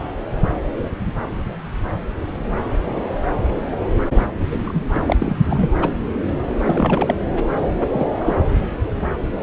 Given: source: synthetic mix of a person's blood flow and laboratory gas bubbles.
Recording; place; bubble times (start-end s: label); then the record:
Doppler ultrasound of blood flow; subclavian vein
4.64-4.84 s: bubbles
4.93-4.99 s: bubbles
5.07-5.17 s: bubbles
5.19-5.36 s: bubbles
5.47-5.69 s: bubbles
5.81-5.90 s: bubbles
6.67-7.14 s: bubbles
7.92-8.06 s: bubbles
8.20-8.35 s: bubbles
From the record:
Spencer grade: 2 (many but less than half of the cardiac periods contain bubble signals, singularly or in groups); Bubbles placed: anywhere in the cardiac cycle